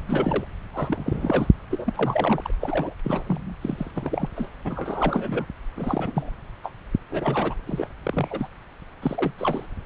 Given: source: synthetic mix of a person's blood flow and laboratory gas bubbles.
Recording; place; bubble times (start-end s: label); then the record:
Doppler ultrasound of blood flow; subclavian vein
0.07-0.46 s: bubbles
0.73-1.47 s: bubbles
1.71-2.54 s: bubbles
2.60-2.95 s: bubbles
3.04-3.56 s: bubbles
3.61-3.91 s: bubbles
3.94-4.29 s: bubbles
4.36-4.51 s: bubbles
4.65-5.45 s: bubbles
5.76-6.32 s: bubbles
6.63-6.72 s: bubbles
7.10-7.55 s: bubbles
7.66-7.89 s: bubbles
8.03-8.48 s: bubbles
9.02-9.33 s: bubbles
9.38-9.67 s: bubbles
From the record:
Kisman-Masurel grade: 342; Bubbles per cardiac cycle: rolling drumbeat, 9 or more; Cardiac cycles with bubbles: 100%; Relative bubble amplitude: moderate (0.250 to 0.450); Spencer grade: 3 (all of the cardiac periods contain showers or single bubble signals, but not dominating or overriding the cardiac motion signals); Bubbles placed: anywhere in the cardiac cycle